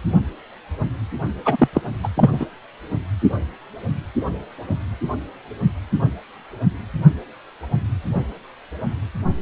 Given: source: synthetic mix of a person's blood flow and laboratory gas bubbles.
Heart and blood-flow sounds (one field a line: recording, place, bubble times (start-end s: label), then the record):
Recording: Doppler ultrasound of blood flow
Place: precordium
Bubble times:
1.45-1.56 s: bubbles
1.58-1.68 s: bubbles
1.73-1.82 s: bubbles
2.03-2.08 s: bubbles
2.17-2.46 s: bubbles
From the record:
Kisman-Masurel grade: 213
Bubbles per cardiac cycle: several, 3 to 8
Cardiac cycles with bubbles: 1 to 10%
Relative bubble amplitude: loud (0.450 to 0.775)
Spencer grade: 1 (occasional bubble signal discernible with the cardiac motion signal, with majority of cardiac periods free of bubbles)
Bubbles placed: only in the low amplitude regions of the cardiac cycle